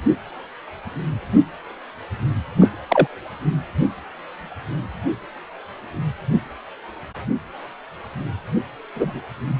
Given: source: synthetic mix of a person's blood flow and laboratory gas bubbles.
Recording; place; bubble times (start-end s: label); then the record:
Doppler ultrasound of blood flow; precordium
2.60-2.69 s: bubbles
2.88-3.07 s: bubbles
8.95-9.21 s: bubbles
From the record:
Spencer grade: 2 (many but less than half of the cardiac periods contain bubble signals, singularly or in groups); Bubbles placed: anywhere in the cardiac cycle